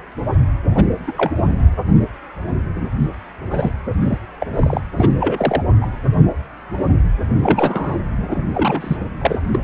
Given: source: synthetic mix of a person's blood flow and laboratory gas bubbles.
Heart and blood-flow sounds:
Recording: Doppler ultrasound of blood flow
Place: precordium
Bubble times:
0.71-0.84 s: bubbles
1.07-1.12 s: bubbles
1.17-1.32 s: bubbles
1.38-1.44 s: bubbles
3.50-3.71 s: bubbles
4.01-4.17 s: bubbles
4.41-4.47 s: bubbles
4.53-4.81 s: bubbles
4.98-5.09 s: bubbles
5.20-5.62 s: bubbles
5.81-5.87 s: bubbles
7.38-7.97 s: bubbles
8.30-8.45 s: bubbles
8.54-8.96 s: bubbles
9.21-9.36 s: bubbles
9.52-9.59 s: bubbles
From the record:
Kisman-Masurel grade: 232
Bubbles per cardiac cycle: several, 3 to 8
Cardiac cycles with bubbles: 50 to 99%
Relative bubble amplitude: moderate (0.250 to 0.450)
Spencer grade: 3 (all of the cardiac periods contain showers or single bubble signals, but not dominating or overriding the cardiac motion signals)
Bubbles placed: anywhere in the cardiac cycle

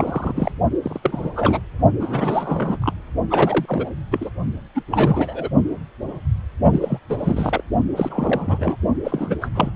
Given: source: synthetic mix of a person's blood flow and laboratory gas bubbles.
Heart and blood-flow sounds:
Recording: Doppler ultrasound of blood flow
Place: precordium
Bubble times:
0.00-0.58 s: bubbles
0.82-1.00 s: bubbles
1.03-1.60 s: bubbles
1.99-2.78 s: bubbles
2.81-2.93 s: bubbles
3.30-3.90 s: bubbles
4.11-4.30 s: bubbles
4.75-4.83 s: bubbles
4.88-5.49 s: bubbles
6.73-6.99 s: bubbles
7.10-7.63 s: bubbles
7.96-8.76 s: bubbles
9.04-9.38 s: bubbles
9.41-9.49 s: bubbles
9.54-9.70 s: bubbles
From the record:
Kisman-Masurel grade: 332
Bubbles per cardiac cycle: rolling drumbeat, 9 or more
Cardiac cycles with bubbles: 50 to 99%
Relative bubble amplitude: moderate (0.250 to 0.450)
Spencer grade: 3 (all of the cardiac periods contain showers or single bubble signals, but not dominating or overriding the cardiac motion signals)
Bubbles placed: only in the low amplitude regions of the cardiac cycle

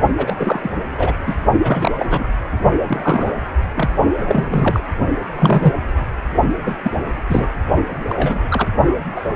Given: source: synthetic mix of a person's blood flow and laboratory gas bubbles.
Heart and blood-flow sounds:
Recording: Doppler ultrasound of blood flow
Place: precordium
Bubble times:
0.18-0.84 s: bubbles
0.98-1.12 s: bubbles
1.26-1.35 s: bubbles
1.60-2.06 s: bubbles
2.09-2.23 s: bubbles
2.87-3.33 s: bubbles
3.75-3.89 s: bubbles
4.21-4.80 s: bubbles
5.35-5.74 s: bubbles
6.66-6.75 s: bubbles
6.83-6.91 s: bubbles
7.29-7.47 s: bubbles
8.09-8.40 s: bubbles
8.49-8.68 s: bubbles
9.16-9.21 s: bubbles
9.29-9.36 s: bubbles
From the record:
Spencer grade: 3 (all of the cardiac periods contain showers or single bubble signals, but not dominating or overriding the cardiac motion signals)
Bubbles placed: only in the low amplitude regions of the cardiac cycle

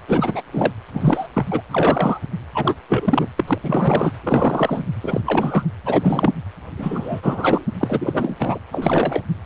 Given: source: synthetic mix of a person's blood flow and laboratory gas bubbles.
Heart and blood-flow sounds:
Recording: Doppler ultrasound of blood flow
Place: precordium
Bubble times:
0.08-0.42 s: bubbles
0.53-0.72 s: bubbles
0.93-1.27 s: bubbles
1.33-1.46 s: bubbles
1.50-1.62 s: bubbles
1.69-2.21 s: bubbles
2.54-2.75 s: bubbles
2.89-3.29 s: bubbles
3.36-3.44 s: bubbles
3.47-3.58 s: bubbles
3.62-4.12 s: bubbles
4.23-4.83 s: bubbles
5.00-5.21 s: bubbles
5.25-5.64 s: bubbles
5.85-6.32 s: bubbles
6.76-7.66 s: bubbles
7.79-8.35 s: bubbles
8.39-8.59 s: bubbles
8.72-9.23 s: bubbles
From the record:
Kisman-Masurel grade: 343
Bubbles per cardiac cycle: rolling drumbeat, 9 or more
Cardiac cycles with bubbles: 100%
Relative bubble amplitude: loud (0.450 to 0.775)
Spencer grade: 3 (all of the cardiac periods contain showers or single bubble signals, but not dominating or overriding the cardiac motion signals)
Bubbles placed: anywhere in the cardiac cycle

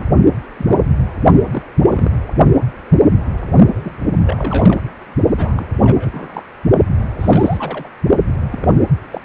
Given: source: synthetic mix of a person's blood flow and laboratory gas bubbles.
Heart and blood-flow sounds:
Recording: Doppler ultrasound of blood flow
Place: precordium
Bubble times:
0.00-0.05 s: bubbles
0.57-0.90 s: bubbles
0.93-0.99 s: bubbles
1.47-1.61 s: bubbles
1.83-2.11 s: bubbles
3.73-3.90 s: bubbles
4.22-4.80 s: bubbles
5.36-5.64 s: bubbles
5.84-6.43 s: bubbles
7.19-7.89 s: bubbles
8.50-8.68 s: bubbles
9.12-9.21 s: bubbles
From the record:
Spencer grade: 3 (all of the cardiac periods contain showers or single bubble signals, but not dominating or overriding the cardiac motion signals)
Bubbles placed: only in the low amplitude regions of the cardiac cycle

